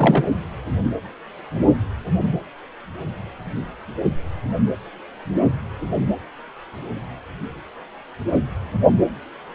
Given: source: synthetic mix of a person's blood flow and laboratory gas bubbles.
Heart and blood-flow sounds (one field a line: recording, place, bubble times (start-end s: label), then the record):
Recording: Doppler ultrasound of blood flow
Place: precordium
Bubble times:
0.00-0.28 s: bubbles
From the record:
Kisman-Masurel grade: 213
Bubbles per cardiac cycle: several, 3 to 8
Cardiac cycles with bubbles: 1 to 10%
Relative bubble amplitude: loud (0.450 to 0.775)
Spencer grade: 1 (occasional bubble signal discernible with the cardiac motion signal, with majority of cardiac periods free of bubbles)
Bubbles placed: anywhere in the cardiac cycle